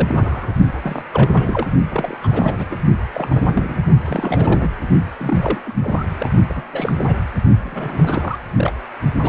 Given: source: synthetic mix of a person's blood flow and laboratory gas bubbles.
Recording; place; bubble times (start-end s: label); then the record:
Doppler ultrasound of blood flow; precordium
0.00-0.51 s: bubbles
0.80-1.02 s: bubbles
1.13-1.30 s: bubbles
1.33-1.68 s: bubbles
1.91-2.17 s: bubbles
2.22-2.76 s: bubbles
3.13-3.79 s: bubbles
4.04-4.69 s: bubbles
5.19-5.62 s: bubbles
5.65-5.73 s: bubbles
5.76-6.05 s: bubbles
6.20-6.31 s: bubbles
6.49-6.62 s: bubbles
6.72-7.18 s: bubbles
7.63-8.38 s: bubbles
8.54-8.72 s: bubbles
8.75-8.79 s: bubbles
9.16-9.29 s: bubbles
From the record:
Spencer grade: 3 (all of the cardiac periods contain showers or single bubble signals, but not dominating or overriding the cardiac motion signals); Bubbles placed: only in the low amplitude regions of the cardiac cycle